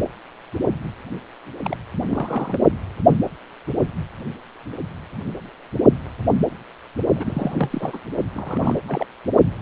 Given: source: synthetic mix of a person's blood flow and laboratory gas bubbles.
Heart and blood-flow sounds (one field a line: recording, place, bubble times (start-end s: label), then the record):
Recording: Doppler ultrasound of blood flow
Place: precordium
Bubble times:
1.64-1.76 s: bubbles
2.08-2.57 s: bubbles
7.16-8.01 s: bubbles
8.35-8.79 s: bubbles
8.88-9.07 s: bubbles
From the record:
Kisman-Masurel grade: 221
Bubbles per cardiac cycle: several, 3 to 8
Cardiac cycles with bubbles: 10 to 50%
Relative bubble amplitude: barely perceptible (0.100 to 0.250)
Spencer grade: 2 (many but less than half of the cardiac periods contain bubble signals, singularly or in groups)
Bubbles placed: only in the low amplitude regions of the cardiac cycle